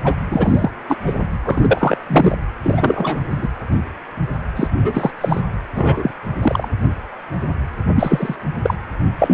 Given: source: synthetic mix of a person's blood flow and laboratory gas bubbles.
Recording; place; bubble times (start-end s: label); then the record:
Doppler ultrasound of blood flow; precordium
0.04-0.14 s: bubbles
0.30-0.71 s: bubbles
0.88-0.96 s: bubbles
1.06-1.14 s: bubbles
1.45-1.98 s: bubbles
2.07-2.38 s: bubbles
2.62-3.21 s: bubbles
3.30-3.48 s: bubbles
4.55-4.67 s: bubbles
4.79-5.11 s: bubbles
5.21-5.41 s: bubbles
5.74-6.12 s: bubbles
6.42-6.68 s: bubbles
7.94-8.36 s: bubbles
8.63-8.74 s: bubbles
9.18-9.34 s: bubbles
From the record:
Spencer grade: 3 (all of the cardiac periods contain showers or single bubble signals, but not dominating or overriding the cardiac motion signals); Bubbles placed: anywhere in the cardiac cycle